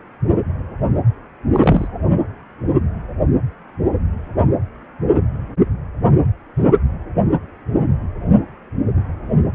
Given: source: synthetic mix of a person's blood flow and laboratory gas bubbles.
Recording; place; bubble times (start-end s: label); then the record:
Doppler ultrasound of blood flow; precordium
1.52-1.88 s: bubbles
From the record:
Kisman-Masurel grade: 113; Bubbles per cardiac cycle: 1 to 2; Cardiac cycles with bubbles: 1 to 10%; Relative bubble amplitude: loud (0.450 to 0.775); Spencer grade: 1 (occasional bubble signal discernible with the cardiac motion signal, with majority of cardiac periods free of bubbles); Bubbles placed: anywhere in the cardiac cycle